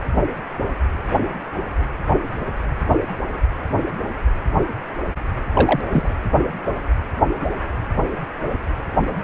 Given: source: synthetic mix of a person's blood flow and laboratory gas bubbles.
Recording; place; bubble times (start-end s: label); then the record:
Doppler ultrasound of blood flow; precordium
5.54-5.81 s: bubbles
5.92-6.08 s: bubbles
From the record:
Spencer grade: 1 (occasional bubble signal discernible with the cardiac motion signal, with majority of cardiac periods free of bubbles); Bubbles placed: anywhere in the cardiac cycle